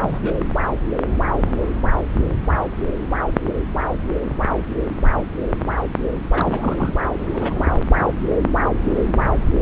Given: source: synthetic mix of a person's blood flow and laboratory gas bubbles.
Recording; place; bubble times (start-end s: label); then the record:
Doppler ultrasound of blood flow; subclavian vein
0.00-0.48 s: bubbles
6.30-6.95 s: bubbles
7.03-7.08 s: bubbles
7.19-7.30 s: bubbles
7.32-7.80 s: bubbles
From the record:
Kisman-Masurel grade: 222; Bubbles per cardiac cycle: several, 3 to 8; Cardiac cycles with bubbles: 10 to 50%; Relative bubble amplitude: moderate (0.250 to 0.450); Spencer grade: 2 (many but less than half of the cardiac periods contain bubble signals, singularly or in groups); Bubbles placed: anywhere in the cardiac cycle